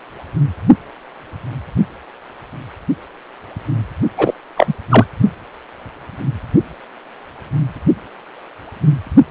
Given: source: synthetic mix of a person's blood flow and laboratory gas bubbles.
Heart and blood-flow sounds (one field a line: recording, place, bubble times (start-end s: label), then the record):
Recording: Doppler ultrasound of blood flow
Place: precordium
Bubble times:
4.17-4.34 s: bubbles
4.57-4.74 s: bubbles
4.90-5.05 s: bubbles
From the record:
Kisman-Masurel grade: 213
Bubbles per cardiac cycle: several, 3 to 8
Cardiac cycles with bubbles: 1 to 10%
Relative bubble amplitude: loud (0.450 to 0.775)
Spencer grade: 1 (occasional bubble signal discernible with the cardiac motion signal, with majority of cardiac periods free of bubbles)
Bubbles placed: only in the low amplitude regions of the cardiac cycle